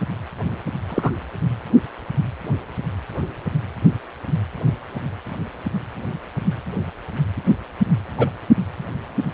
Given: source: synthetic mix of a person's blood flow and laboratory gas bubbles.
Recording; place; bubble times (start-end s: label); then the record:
Doppler ultrasound of blood flow; precordium
0.89-1.10 s: bubbles
8.17-8.30 s: bubbles
From the record:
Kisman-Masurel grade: 123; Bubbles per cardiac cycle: 1 to 2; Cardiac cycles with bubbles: 10 to 50%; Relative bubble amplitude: loud (0.450 to 0.775); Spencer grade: 2 (many but less than half of the cardiac periods contain bubble signals, singularly or in groups); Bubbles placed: anywhere in the cardiac cycle